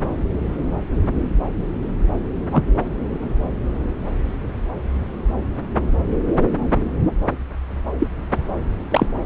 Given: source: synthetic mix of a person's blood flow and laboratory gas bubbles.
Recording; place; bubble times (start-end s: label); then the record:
Doppler ultrasound of blood flow; subclavian vein
2.50-2.63 s: bubbles
7.99-8.07 s: bubbles
8.90-9.06 s: bubbles
From the record:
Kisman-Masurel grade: 123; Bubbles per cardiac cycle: 1 to 2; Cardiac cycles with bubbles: 10 to 50%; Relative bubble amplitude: loud (0.450 to 0.775); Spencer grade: 2 (many but less than half of the cardiac periods contain bubble signals, singularly or in groups); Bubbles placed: anywhere in the cardiac cycle